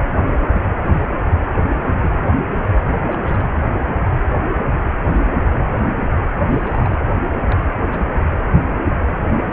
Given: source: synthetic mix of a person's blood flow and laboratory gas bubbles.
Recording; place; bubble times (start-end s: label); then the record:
Doppler ultrasound of blood flow; precordium
0.32-0.52 s: bubbles
0.85-1.08 s: bubbles
1.52-1.59 s: bubbles
1.82-1.93 s: bubbles
1.98-2.30 s: bubbles
3.11-3.44 s: bubbles
6.49-6.96 s: bubbles
7.50-7.56 s: bubbles
7.62-7.65 s: bubbles
7.92-8.04 s: bubbles
From the record:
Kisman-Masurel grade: 221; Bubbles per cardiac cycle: several, 3 to 8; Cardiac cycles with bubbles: 10 to 50%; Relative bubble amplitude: barely perceptible (0.100 to 0.250); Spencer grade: 2 (many but less than half of the cardiac periods contain bubble signals, singularly or in groups); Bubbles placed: anywhere in the cardiac cycle